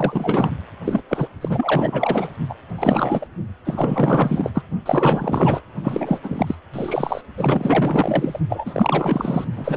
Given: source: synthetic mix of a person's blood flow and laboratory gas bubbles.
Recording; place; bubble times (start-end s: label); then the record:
Doppler ultrasound of blood flow; precordium
0.00-0.52 s: bubbles
0.84-1.02 s: bubbles
1.08-1.27 s: bubbles
1.41-2.32 s: bubbles
2.49-2.54 s: bubbles
2.69-3.27 s: bubbles
3.65-4.62 s: bubbles
4.86-5.61 s: bubbles
5.83-6.19 s: bubbles
6.24-6.55 s: bubbles
6.74-7.21 s: bubbles
7.37-8.40 s: bubbles
8.48-9.47 s: bubbles
9.56-9.77 s: bubbles
From the record:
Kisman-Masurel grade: 444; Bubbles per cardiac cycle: continuous sound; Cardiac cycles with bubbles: 100%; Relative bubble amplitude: maximal (0.775 to 0.999); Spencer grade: 4 (maximum detectable bubble signal sounding continuously throughout systole and diastole of every cardiac period, and overriding the amplitude of the normal cardiac signals); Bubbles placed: only in the low amplitude regions of the cardiac cycle